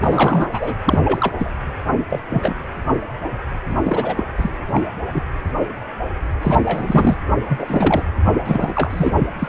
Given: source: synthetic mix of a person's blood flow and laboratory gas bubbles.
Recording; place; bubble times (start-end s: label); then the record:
Doppler ultrasound of blood flow; precordium
0.01-0.74 s: bubbles
0.85-1.00 s: bubbles
1.04-1.34 s: bubbles
1.38-1.52 s: bubbles
1.96-2.05 s: bubbles
2.09-2.20 s: bubbles
2.29-2.54 s: bubbles
3.69-3.75 s: bubbles
3.84-4.24 s: bubbles
4.37-4.53 s: bubbles
4.74-4.83 s: bubbles
5.06-5.22 s: bubbles
6.42-6.60 s: bubbles
6.65-7.17 s: bubbles
7.49-8.02 s: bubbles
8.25-8.35 s: bubbles
8.45-9.14 s: bubbles
9.19-9.28 s: bubbles
9.39-9.49 s: bubbles
From the record:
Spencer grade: 3 (all of the cardiac periods contain showers or single bubble signals, but not dominating or overriding the cardiac motion signals); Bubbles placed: anywhere in the cardiac cycle